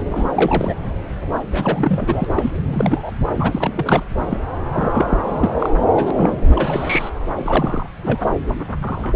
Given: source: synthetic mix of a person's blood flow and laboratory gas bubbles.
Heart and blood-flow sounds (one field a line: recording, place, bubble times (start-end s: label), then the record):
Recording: Doppler ultrasound of blood flow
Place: subclavian vein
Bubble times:
0.00-0.03 s: bubbles
0.12-0.75 s: bubbles
1.21-1.40 s: bubbles
1.52-2.25 s: bubbles
2.35-2.52 s: bubbles
2.56-3.11 s: bubbles
3.37-4.03 s: bubbles
4.26-4.38 s: bubbles
4.71-5.18 s: bubbles
5.22-5.51 s: bubbles
5.59-5.69 s: bubbles
5.94-6.11 s: bubbles
6.15-6.33 s: bubbles
6.47-7.09 s: bubbles
7.36-7.87 s: bubbles
8.02-8.38 s: bubbles
8.82-9.13 s: bubbles
From the record:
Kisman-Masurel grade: 342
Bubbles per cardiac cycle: rolling drumbeat, 9 or more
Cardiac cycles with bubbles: 100%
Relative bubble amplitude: moderate (0.250 to 0.450)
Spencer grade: 3 (all of the cardiac periods contain showers or single bubble signals, but not dominating or overriding the cardiac motion signals)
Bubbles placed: anywhere in the cardiac cycle